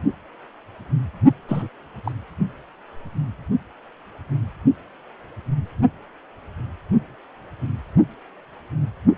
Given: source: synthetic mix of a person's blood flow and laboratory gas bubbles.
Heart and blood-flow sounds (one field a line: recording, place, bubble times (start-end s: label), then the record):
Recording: Doppler ultrasound of blood flow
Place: precordium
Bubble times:
1.48-1.69 s: bubbles
2.04-2.12 s: bubbles
From the record:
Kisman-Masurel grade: 211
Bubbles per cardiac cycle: several, 3 to 8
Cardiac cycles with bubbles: 1 to 10%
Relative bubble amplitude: barely perceptible (0.100 to 0.250)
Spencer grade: 1 (occasional bubble signal discernible with the cardiac motion signal, with majority of cardiac periods free of bubbles)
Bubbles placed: only in the low amplitude regions of the cardiac cycle